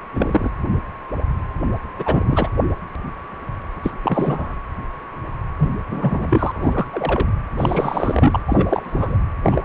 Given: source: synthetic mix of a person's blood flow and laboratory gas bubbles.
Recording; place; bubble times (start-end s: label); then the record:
Doppler ultrasound of blood flow; precordium
0.14-0.50 s: bubbles
1.96-2.50 s: bubbles
3.83-3.93 s: bubbles
4.02-4.54 s: bubbles
5.58-5.71 s: bubbles
5.89-6.52 s: bubbles
6.54-6.86 s: bubbles
6.92-7.29 s: bubbles
7.58-8.40 s: bubbles
8.48-9.18 s: bubbles
9.43-9.65 s: bubbles
From the record:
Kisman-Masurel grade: 233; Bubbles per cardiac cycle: several, 3 to 8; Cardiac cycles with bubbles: 50 to 99%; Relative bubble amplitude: loud (0.450 to 0.775); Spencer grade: 3 (all of the cardiac periods contain showers or single bubble signals, but not dominating or overriding the cardiac motion signals); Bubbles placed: anywhere in the cardiac cycle